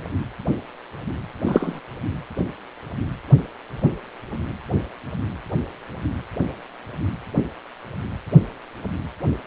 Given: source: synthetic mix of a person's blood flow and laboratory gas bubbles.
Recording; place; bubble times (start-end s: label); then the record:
Doppler ultrasound of blood flow; precordium
1.45-1.81 s: bubbles
From the record:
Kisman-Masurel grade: 113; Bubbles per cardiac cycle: 1 to 2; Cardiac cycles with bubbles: 1 to 10%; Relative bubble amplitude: loud (0.450 to 0.775); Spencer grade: 1 (occasional bubble signal discernible with the cardiac motion signal, with majority of cardiac periods free of bubbles); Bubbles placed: anywhere in the cardiac cycle